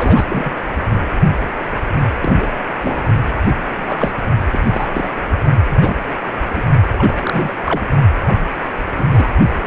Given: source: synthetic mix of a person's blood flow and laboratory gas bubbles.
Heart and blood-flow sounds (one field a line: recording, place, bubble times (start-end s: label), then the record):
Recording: Doppler ultrasound of blood flow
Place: precordium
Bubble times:
0.00-0.52 s: bubbles
0.92-0.99 s: bubbles
2.21-2.49 s: bubbles
2.82-3.02 s: bubbles
3.46-3.55 s: bubbles
3.71-4.12 s: bubbles
4.51-4.60 s: bubbles
4.68-4.88 s: bubbles
4.93-5.10 s: bubbles
5.68-5.95 s: bubbles
6.55-6.63 s: bubbles
6.96-7.56 s: bubbles
7.66-7.83 s: bubbles
8.15-8.51 s: bubbles
8.96-9.06 s: bubbles
9.11-9.28 s: bubbles
From the record:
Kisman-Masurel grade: 242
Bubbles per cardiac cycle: several, 3 to 8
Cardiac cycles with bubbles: 100%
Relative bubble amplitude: moderate (0.250 to 0.450)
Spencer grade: 3 (all of the cardiac periods contain showers or single bubble signals, but not dominating or overriding the cardiac motion signals)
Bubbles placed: only in the low amplitude regions of the cardiac cycle